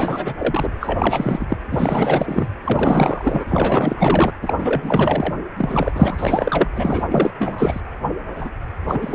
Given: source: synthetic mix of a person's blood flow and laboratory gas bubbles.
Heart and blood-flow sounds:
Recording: Doppler ultrasound of blood flow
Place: precordium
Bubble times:
0.00-0.35 s: bubbles
0.38-0.70 s: bubbles
0.80-1.58 s: bubbles
1.70-2.47 s: bubbles
2.64-3.44 s: bubbles
3.47-4.33 s: bubbles
4.42-5.34 s: bubbles
5.56-6.69 s: bubbles
6.75-7.06 s: bubbles
7.10-7.30 s: bubbles
7.38-7.81 s: bubbles
8.36-8.50 s: bubbles
8.88-9.15 s: bubbles
From the record:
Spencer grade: 4 (maximum detectable bubble signal sounding continuously throughout systole and diastole of every cardiac period, and overriding the amplitude of the normal cardiac signals)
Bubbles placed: anywhere in the cardiac cycle

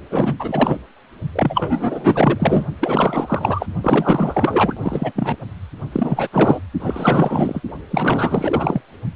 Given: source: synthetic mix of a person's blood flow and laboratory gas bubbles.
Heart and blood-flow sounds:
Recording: Doppler ultrasound of blood flow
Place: precordium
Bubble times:
0.09-0.34 s: bubbles
0.39-0.79 s: bubbles
1.32-2.67 s: bubbles
2.81-3.66 s: bubbles
3.82-5.12 s: bubbles
5.15-5.37 s: bubbles
5.92-6.29 s: bubbles
6.32-6.60 s: bubbles
6.79-7.61 s: bubbles
7.90-8.81 s: bubbles
From the record:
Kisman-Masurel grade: 444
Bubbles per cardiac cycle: continuous sound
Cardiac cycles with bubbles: 100%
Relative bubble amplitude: maximal (0.775 to 0.999)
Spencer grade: 4 (maximum detectable bubble signal sounding continuously throughout systole and diastole of every cardiac period, and overriding the amplitude of the normal cardiac signals)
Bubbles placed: only in the low amplitude regions of the cardiac cycle

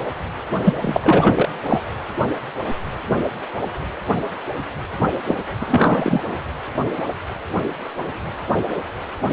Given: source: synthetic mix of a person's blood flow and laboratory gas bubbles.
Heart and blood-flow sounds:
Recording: Doppler ultrasound of blood flow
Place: precordium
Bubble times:
0.64-0.73 s: bubbles
0.80-1.49 s: bubbles
1.64-1.81 s: bubbles
5.27-5.36 s: bubbles
5.60-6.21 s: bubbles
From the record:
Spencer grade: 2 (many but less than half of the cardiac periods contain bubble signals, singularly or in groups)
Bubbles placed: anywhere in the cardiac cycle

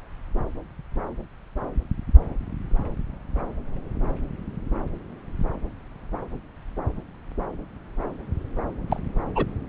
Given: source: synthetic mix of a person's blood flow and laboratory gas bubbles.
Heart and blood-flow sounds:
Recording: Doppler ultrasound of blood flow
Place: subclavian vein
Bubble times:
8.88-9.00 s: bubbles
9.35-9.46 s: bubbles
From the record:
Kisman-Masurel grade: 112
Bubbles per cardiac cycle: 1 to 2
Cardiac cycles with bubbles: 1 to 10%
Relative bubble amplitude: moderate (0.250 to 0.450)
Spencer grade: 1 (occasional bubble signal discernible with the cardiac motion signal, with majority of cardiac periods free of bubbles)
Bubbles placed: anywhere in the cardiac cycle

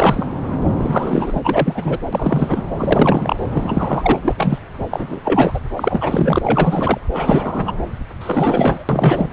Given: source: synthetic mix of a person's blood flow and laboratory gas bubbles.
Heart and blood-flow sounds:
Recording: Doppler ultrasound of blood flow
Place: subclavian vein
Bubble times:
0.00-0.38 s: bubbles
0.76-1.40 s: bubbles
1.44-1.97 s: bubbles
2.12-2.62 s: bubbles
2.78-3.36 s: bubbles
3.51-4.19 s: bubbles
4.24-4.34 s: bubbles
4.37-4.58 s: bubbles
4.91-5.20 s: bubbles
5.24-5.59 s: bubbles
5.76-6.38 s: bubbles
6.44-6.98 s: bubbles
7.13-7.72 s: bubbles
8.20-8.84 s: bubbles
8.88-9.29 s: bubbles
From the record:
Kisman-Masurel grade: 343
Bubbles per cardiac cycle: rolling drumbeat, 9 or more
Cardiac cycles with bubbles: 100%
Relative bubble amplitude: loud (0.450 to 0.775)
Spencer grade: 3 (all of the cardiac periods contain showers or single bubble signals, but not dominating or overriding the cardiac motion signals)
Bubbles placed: anywhere in the cardiac cycle

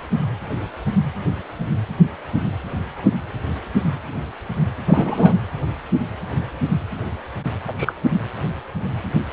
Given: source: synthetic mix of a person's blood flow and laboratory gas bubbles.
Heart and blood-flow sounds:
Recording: Doppler ultrasound of blood flow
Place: precordium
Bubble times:
4.87-5.38 s: bubbles
7.67-7.74 s: bubbles
7.77-7.93 s: bubbles
From the record:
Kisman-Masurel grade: 213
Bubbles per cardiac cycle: several, 3 to 8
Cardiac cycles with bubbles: 1 to 10%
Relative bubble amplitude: loud (0.450 to 0.775)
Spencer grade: 1 (occasional bubble signal discernible with the cardiac motion signal, with majority of cardiac periods free of bubbles)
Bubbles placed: anywhere in the cardiac cycle

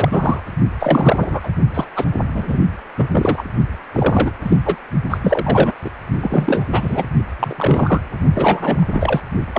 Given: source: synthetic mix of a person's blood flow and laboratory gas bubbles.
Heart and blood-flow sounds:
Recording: Doppler ultrasound of blood flow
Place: precordium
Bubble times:
0.00-0.40 s: bubbles
0.80-1.49 s: bubbles
1.74-1.88 s: bubbles
1.96-2.05 s: bubbles
2.35-2.57 s: bubbles
2.97-3.06 s: bubbles
3.11-3.44 s: bubbles
3.92-4.31 s: bubbles
4.42-4.57 s: bubbles
4.65-4.76 s: bubbles
5.10-5.17 s: bubbles
5.22-5.74 s: bubbles
5.84-5.89 s: bubbles
6.21-6.64 s: bubbles
6.70-7.04 s: bubbles
7.39-8.01 s: bubbles
8.35-8.87 s: bubbles
8.92-9.21 s: bubbles
9.53-9.59 s: bubbles
From the record:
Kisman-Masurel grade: 343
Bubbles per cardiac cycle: rolling drumbeat, 9 or more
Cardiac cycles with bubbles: 100%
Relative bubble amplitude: loud (0.450 to 0.775)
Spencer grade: 3 (all of the cardiac periods contain showers or single bubble signals, but not dominating or overriding the cardiac motion signals)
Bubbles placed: only in the low amplitude regions of the cardiac cycle

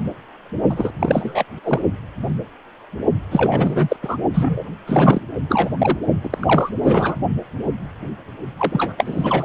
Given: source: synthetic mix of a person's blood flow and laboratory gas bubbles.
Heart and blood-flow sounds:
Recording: Doppler ultrasound of blood flow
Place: precordium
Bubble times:
0.70-0.91 s: bubbles
0.99-1.44 s: bubbles
1.64-1.79 s: bubbles
3.31-3.97 s: bubbles
4.03-4.18 s: bubbles
4.34-4.64 s: bubbles
4.87-5.21 s: bubbles
5.48-5.70 s: bubbles
5.78-5.97 s: bubbles
6.24-6.70 s: bubbles
6.83-7.16 s: bubbles
8.57-8.92 s: bubbles
8.97-9.45 s: bubbles
From the record:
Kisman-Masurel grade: 333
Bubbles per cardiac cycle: rolling drumbeat, 9 or more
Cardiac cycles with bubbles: 50 to 99%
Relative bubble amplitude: loud (0.450 to 0.775)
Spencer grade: 3 (all of the cardiac periods contain showers or single bubble signals, but not dominating or overriding the cardiac motion signals)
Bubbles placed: only in the low amplitude regions of the cardiac cycle

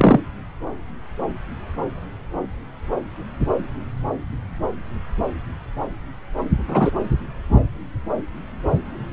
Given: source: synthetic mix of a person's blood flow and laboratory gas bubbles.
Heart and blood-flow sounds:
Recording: Doppler ultrasound of blood flow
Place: subclavian vein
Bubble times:
0.00-0.20 s: bubbles
6.67-6.92 s: bubbles
From the record:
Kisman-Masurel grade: 123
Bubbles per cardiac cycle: 1 to 2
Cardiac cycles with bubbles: 10 to 50%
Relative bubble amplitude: loud (0.450 to 0.775)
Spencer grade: 2 (many but less than half of the cardiac periods contain bubble signals, singularly or in groups)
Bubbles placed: anywhere in the cardiac cycle

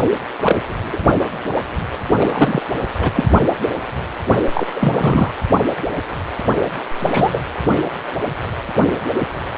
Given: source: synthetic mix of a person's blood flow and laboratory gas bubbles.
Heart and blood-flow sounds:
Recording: Doppler ultrasound of blood flow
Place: precordium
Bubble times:
0.42-0.60 s: bubbles
0.92-0.97 s: bubbles
2.19-2.62 s: bubbles
2.98-3.12 s: bubbles
3.16-3.26 s: bubbles
4.54-4.67 s: bubbles
4.75-5.30 s: bubbles
6.99-7.42 s: bubbles
From the record:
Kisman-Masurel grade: 233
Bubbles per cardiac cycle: several, 3 to 8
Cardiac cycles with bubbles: 50 to 99%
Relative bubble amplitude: loud (0.450 to 0.775)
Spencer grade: 3 (all of the cardiac periods contain showers or single bubble signals, but not dominating or overriding the cardiac motion signals)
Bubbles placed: only in the low amplitude regions of the cardiac cycle

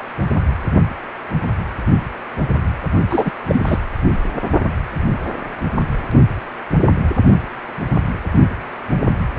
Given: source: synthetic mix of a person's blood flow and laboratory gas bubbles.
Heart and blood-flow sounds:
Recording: Doppler ultrasound of blood flow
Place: precordium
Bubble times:
3.09-3.32 s: bubbles
3.49-3.63 s: bubbles
3.66-3.77 s: bubbles
From the record:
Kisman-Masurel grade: 213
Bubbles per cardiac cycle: several, 3 to 8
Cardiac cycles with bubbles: 1 to 10%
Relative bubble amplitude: loud (0.450 to 0.775)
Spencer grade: 1 (occasional bubble signal discernible with the cardiac motion signal, with majority of cardiac periods free of bubbles)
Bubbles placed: anywhere in the cardiac cycle

